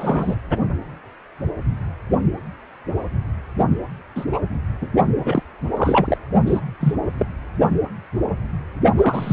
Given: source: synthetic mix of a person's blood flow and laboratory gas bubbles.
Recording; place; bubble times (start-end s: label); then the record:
Doppler ultrasound of blood flow; precordium
0.00-0.36 s: bubbles
4.16-4.25 s: bubbles
4.33-4.41 s: bubbles
4.82-4.87 s: bubbles
5.19-5.43 s: bubbles
5.75-6.17 s: bubbles
6.46-6.61 s: bubbles
6.80-6.95 s: bubbles
7.19-7.26 s: bubbles
8.97-9.33 s: bubbles
From the record:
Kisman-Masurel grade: 232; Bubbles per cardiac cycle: several, 3 to 8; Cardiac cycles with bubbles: 50 to 99%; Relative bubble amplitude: moderate (0.250 to 0.450); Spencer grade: 3 (all of the cardiac periods contain showers or single bubble signals, but not dominating or overriding the cardiac motion signals); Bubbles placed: only in the low amplitude regions of the cardiac cycle